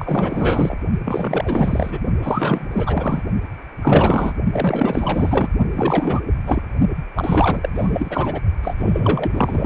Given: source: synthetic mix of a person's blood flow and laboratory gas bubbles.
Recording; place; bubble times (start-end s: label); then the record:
Doppler ultrasound of blood flow; precordium
0.00-0.75 s: bubbles
1.04-1.99 s: bubbles
2.22-2.67 s: bubbles
2.72-3.22 s: bubbles
3.81-4.34 s: bubbles
4.52-5.48 s: bubbles
5.74-6.23 s: bubbles
6.46-6.62 s: bubbles
7.15-7.69 s: bubbles
7.75-8.42 s: bubbles
8.62-9.66 s: bubbles
From the record:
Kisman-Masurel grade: 444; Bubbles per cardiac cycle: continuous sound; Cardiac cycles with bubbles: 100%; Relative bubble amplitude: maximal (0.775 to 0.999); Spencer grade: 4 (maximum detectable bubble signal sounding continuously throughout systole and diastole of every cardiac period, and overriding the amplitude of the normal cardiac signals); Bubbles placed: only in the low amplitude regions of the cardiac cycle